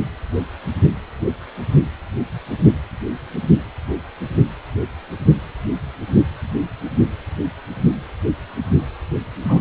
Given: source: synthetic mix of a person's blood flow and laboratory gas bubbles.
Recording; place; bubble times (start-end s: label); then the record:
Doppler ultrasound of blood flow; precordium
9.39-9.61 s: bubbles
From the record:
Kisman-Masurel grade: 111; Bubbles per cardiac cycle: 1 to 2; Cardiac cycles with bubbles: 1 to 10%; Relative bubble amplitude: barely perceptible (0.100 to 0.250); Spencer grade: 1 (occasional bubble signal discernible with the cardiac motion signal, with majority of cardiac periods free of bubbles); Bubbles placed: anywhere in the cardiac cycle